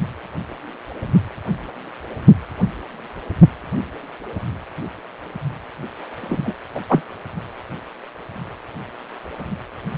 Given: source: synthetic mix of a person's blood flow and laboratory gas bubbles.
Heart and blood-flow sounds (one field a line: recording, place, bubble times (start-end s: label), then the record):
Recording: Doppler ultrasound of blood flow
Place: precordium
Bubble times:
6.21-6.54 s: bubbles
6.75-6.81 s: bubbles
6.88-7.01 s: bubbles
9.93-9.98 s: bubbles
From the record:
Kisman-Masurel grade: 223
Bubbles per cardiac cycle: several, 3 to 8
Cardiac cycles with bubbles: 10 to 50%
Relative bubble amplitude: loud (0.450 to 0.775)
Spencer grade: 2 (many but less than half of the cardiac periods contain bubble signals, singularly or in groups)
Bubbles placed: anywhere in the cardiac cycle